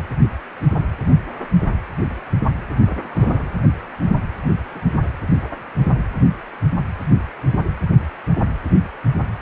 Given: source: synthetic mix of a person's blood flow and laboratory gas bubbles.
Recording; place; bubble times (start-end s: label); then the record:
Doppler ultrasound of blood flow; precordium
2.78-3.51 s: bubbles
4.42-4.54 s: bubbles
4.68-4.82 s: bubbles
4.94-5.04 s: bubbles
From the record:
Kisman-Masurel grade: 221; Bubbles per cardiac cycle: several, 3 to 8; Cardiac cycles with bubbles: 10 to 50%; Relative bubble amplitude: barely perceptible (0.100 to 0.250); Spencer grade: 2 (many but less than half of the cardiac periods contain bubble signals, singularly or in groups); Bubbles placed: anywhere in the cardiac cycle